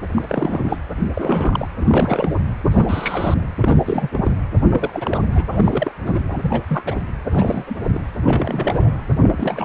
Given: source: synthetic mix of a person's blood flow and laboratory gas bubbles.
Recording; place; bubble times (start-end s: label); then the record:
Doppler ultrasound of blood flow; precordium
0.00-0.02 s: bubbles
0.15-0.77 s: bubbles
1.14-1.68 s: bubbles
1.79-2.35 s: bubbles
2.70-3.34 s: bubbles
3.62-3.76 s: bubbles
3.84-4.08 s: bubbles
4.12-4.30 s: bubbles
4.71-4.91 s: bubbles
4.93-5.19 s: bubbles
5.33-5.49 s: bubbles
5.51-5.92 s: bubbles
6.05-6.24 s: bubbles
6.28-6.38 s: bubbles
6.42-6.62 s: bubbles
6.68-7.00 s: bubbles
7.30-7.75 s: bubbles
7.94-8.01 s: bubbles
8.24-8.93 s: bubbles
9.18-9.65 s: bubbles
From the record:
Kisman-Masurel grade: 342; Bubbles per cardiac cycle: rolling drumbeat, 9 or more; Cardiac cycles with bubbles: 100%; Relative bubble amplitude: moderate (0.250 to 0.450); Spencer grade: 3 (all of the cardiac periods contain showers or single bubble signals, but not dominating or overriding the cardiac motion signals); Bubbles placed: anywhere in the cardiac cycle